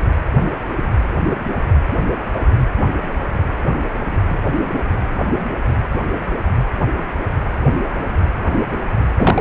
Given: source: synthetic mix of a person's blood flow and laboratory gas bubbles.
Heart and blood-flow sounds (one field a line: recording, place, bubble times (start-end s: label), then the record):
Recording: Doppler ultrasound of blood flow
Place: precordium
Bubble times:
9.17-9.41 s: bubbles
From the record:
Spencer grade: 1 (occasional bubble signal discernible with the cardiac motion signal, with majority of cardiac periods free of bubbles)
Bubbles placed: anywhere in the cardiac cycle